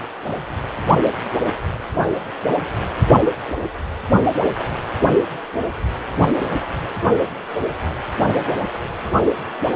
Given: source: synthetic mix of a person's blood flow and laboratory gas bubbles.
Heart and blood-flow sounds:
Doppler ultrasound of blood flow; precordium
9.73-9.76 s: bubbles
From the record:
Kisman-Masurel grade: 122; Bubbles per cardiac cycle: 1 to 2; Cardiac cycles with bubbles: 10 to 50%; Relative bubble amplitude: moderate (0.250 to 0.450); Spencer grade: 2 (many but less than half of the cardiac periods contain bubble signals, singularly or in groups); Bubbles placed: only in the low amplitude regions of the cardiac cycle

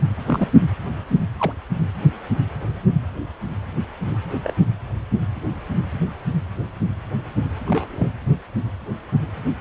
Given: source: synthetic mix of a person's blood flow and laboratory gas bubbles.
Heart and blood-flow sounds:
Doppler ultrasound of blood flow; precordium
0.26-0.48 s: bubbles
1.38-1.52 s: bubbles
4.29-4.40 s: bubbles
4.43-4.53 s: bubbles
7.66-8.11 s: bubbles
From the record:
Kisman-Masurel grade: 122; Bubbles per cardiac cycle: 1 to 2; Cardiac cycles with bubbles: 10 to 50%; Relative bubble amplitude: moderate (0.250 to 0.450); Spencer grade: 2 (many but less than half of the cardiac periods contain bubble signals, singularly or in groups); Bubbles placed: anywhere in the cardiac cycle

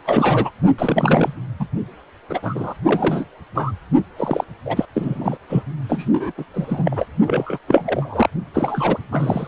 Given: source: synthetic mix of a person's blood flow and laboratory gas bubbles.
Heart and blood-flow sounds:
Doppler ultrasound of blood flow; precordium
0.00-0.02 s: bubbles
0.05-0.51 s: bubbles
0.78-1.33 s: bubbles
1.59-1.67 s: bubbles
2.29-2.74 s: bubbles
2.85-3.25 s: bubbles
3.55-3.72 s: bubbles
4.16-4.44 s: bubbles
4.65-4.86 s: bubbles
4.94-5.38 s: bubbles
5.49-5.63 s: bubbles
5.89-6.32 s: bubbles
6.38-6.45 s: bubbles
6.54-7.06 s: bubbles
7.26-7.58 s: bubbles
7.68-8.29 s: bubbles
8.54-8.98 s: bubbles
9.12-9.47 s: bubbles
From the record:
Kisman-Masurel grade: 343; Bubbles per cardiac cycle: rolling drumbeat, 9 or more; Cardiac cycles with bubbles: 100%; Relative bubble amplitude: loud (0.450 to 0.775); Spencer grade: 3 (all of the cardiac periods contain showers or single bubble signals, but not dominating or overriding the cardiac motion signals); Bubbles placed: only in the low amplitude regions of the cardiac cycle

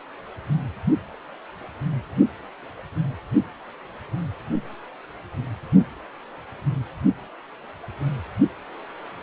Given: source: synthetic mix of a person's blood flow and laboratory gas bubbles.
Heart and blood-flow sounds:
Doppler ultrasound of blood flow; precordium
no bubbles
From the record:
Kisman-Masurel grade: 000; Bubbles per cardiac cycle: 0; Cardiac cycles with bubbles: 0%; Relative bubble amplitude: no bubbles discernible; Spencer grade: 0 (complete lack of bubble signals)

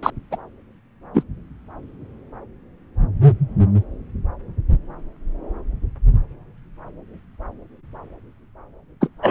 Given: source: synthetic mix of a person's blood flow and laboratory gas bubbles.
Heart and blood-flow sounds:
Doppler ultrasound of blood flow; subclavian vein
0.03-0.11 s: bubbles
0.31-0.37 s: bubbles
1.14-1.23 s: bubbles
9.00-9.08 s: bubbles
9.22-9.31 s: bubbles
From the record:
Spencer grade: 2 (many but less than half of the cardiac periods contain bubble signals, singularly or in groups); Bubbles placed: anywhere in the cardiac cycle

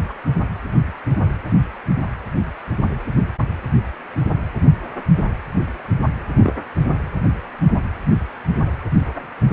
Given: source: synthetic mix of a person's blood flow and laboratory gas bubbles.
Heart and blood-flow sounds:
Doppler ultrasound of blood flow; precordium
0.09-0.13 s: bubbles
6.37-6.52 s: bubbles
From the record:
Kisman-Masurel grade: 122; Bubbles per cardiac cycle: 1 to 2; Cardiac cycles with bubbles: 10 to 50%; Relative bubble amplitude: moderate (0.250 to 0.450); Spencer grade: 2 (many but less than half of the cardiac periods contain bubble signals, singularly or in groups); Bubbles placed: anywhere in the cardiac cycle

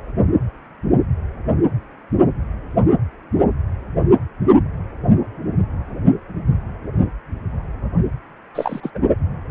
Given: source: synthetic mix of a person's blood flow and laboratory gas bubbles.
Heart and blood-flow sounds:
Doppler ultrasound of blood flow; precordium
8.54-8.80 s: bubbles
8.82-8.90 s: bubbles
8.95-8.98 s: bubbles
From the record:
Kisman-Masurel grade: 212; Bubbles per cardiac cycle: several, 3 to 8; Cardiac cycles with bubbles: 1 to 10%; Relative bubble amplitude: moderate (0.250 to 0.450); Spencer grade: 1 (occasional bubble signal discernible with the cardiac motion signal, with majority of cardiac periods free of bubbles); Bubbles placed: anywhere in the cardiac cycle

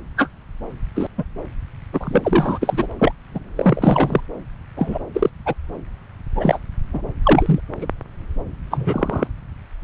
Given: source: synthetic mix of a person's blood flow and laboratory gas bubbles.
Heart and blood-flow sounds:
Doppler ultrasound of blood flow; subclavian vein
0.17-0.29 s: bubbles
0.95-1.07 s: bubbles
1.18-1.23 s: bubbles
1.93-2.58 s: bubbles
2.61-2.87 s: bubbles
2.99-3.12 s: bubbles
3.34-3.40 s: bubbles
3.56-4.21 s: bubbles
4.76-4.98 s: bubbles
5.14-5.29 s: bubbles
5.46-5.54 s: bubbles
6.35-6.59 s: bubbles
6.93-7.01 s: bubbles
7.23-7.60 s: bubbles
7.80-7.86 s: bubbles
8.71-9.27 s: bubbles
From the record:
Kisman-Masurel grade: 233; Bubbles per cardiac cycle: several, 3 to 8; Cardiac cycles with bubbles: 50 to 99%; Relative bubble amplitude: loud (0.450 to 0.775); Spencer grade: 3 (all of the cardiac periods contain showers or single bubble signals, but not dominating or overriding the cardiac motion signals); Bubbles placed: anywhere in the cardiac cycle

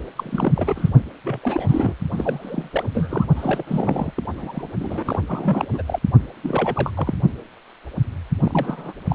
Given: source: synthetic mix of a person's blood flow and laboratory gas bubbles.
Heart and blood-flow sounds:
Doppler ultrasound of blood flow; precordium
0.16-0.52 s: bubbles
0.55-0.89 s: bubbles
1.24-1.96 s: bubbles
2.12-2.92 s: bubbles
2.94-3.26 s: bubbles
3.35-3.63 s: bubbles
3.66-4.12 s: bubbles
4.16-4.23 s: bubbles
4.37-4.67 s: bubbles
4.79-5.19 s: bubbles
5.27-5.67 s: bubbles
5.71-5.83 s: bubbles
5.88-5.99 s: bubbles
6.42-6.91 s: bubbles
6.96-7.15 s: bubbles
8.40-8.92 s: bubbles
9.08-9.14 s: bubbles
From the record:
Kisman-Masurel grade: 332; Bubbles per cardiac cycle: rolling drumbeat, 9 or more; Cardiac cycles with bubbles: 50 to 99%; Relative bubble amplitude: moderate (0.250 to 0.450); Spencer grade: 3 (all of the cardiac periods contain showers or single bubble signals, but not dominating or overriding the cardiac motion signals); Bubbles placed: only in the low amplitude regions of the cardiac cycle

